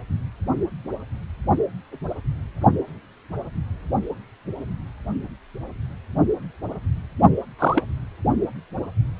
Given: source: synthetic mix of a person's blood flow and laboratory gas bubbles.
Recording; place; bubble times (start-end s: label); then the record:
Doppler ultrasound of blood flow; precordium
7.58-7.84 s: bubbles
From the record:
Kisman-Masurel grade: 113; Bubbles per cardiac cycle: 1 to 2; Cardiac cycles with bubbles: 1 to 10%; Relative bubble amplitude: loud (0.450 to 0.775); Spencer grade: 1 (occasional bubble signal discernible with the cardiac motion signal, with majority of cardiac periods free of bubbles); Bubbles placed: only in the low amplitude regions of the cardiac cycle